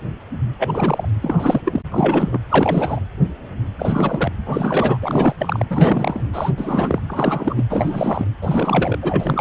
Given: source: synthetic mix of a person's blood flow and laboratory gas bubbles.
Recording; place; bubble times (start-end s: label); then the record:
Doppler ultrasound of blood flow; precordium
0.59-1.06 s: bubbles
1.22-1.61 s: bubbles
1.65-1.81 s: bubbles
1.91-2.39 s: bubbles
2.49-3.00 s: bubbles
3.78-4.32 s: bubbles
4.46-4.98 s: bubbles
5.02-5.65 s: bubbles
5.70-6.28 s: bubbles
6.33-6.51 s: bubbles
6.57-6.99 s: bubbles
7.08-7.64 s: bubbles
7.70-8.25 s: bubbles
8.41-8.98 s: bubbles
9.03-9.41 s: bubbles
From the record:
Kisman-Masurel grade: 332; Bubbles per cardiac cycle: rolling drumbeat, 9 or more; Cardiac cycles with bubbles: 50 to 99%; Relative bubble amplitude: moderate (0.250 to 0.450); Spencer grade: 3 (all of the cardiac periods contain showers or single bubble signals, but not dominating or overriding the cardiac motion signals); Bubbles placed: anywhere in the cardiac cycle